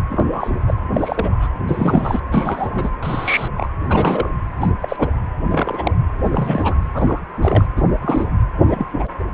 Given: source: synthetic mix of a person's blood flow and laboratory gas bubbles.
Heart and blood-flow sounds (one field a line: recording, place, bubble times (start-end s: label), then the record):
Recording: Doppler ultrasound of blood flow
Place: precordium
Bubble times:
0.09-0.23 s: bubbles
0.30-0.50 s: bubbles
0.67-0.74 s: bubbles
0.94-1.49 s: bubbles
1.67-2.20 s: bubbles
2.31-2.93 s: bubbles
3.02-3.48 s: bubbles
3.57-3.69 s: bubbles
3.83-4.30 s: bubbles
4.60-4.71 s: bubbles
4.81-5.08 s: bubbles
5.50-5.92 s: bubbles
6.24-6.75 s: bubbles
6.93-7.20 s: bubbles
7.42-7.66 s: bubbles
7.77-7.82 s: bubbles
8.02-8.28 s: bubbles
8.68-8.85 s: bubbles
8.98-9.10 s: bubbles
From the record:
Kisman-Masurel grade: 242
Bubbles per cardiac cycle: several, 3 to 8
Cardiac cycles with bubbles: 100%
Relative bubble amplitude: moderate (0.250 to 0.450)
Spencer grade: 3 (all of the cardiac periods contain showers or single bubble signals, but not dominating or overriding the cardiac motion signals)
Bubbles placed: anywhere in the cardiac cycle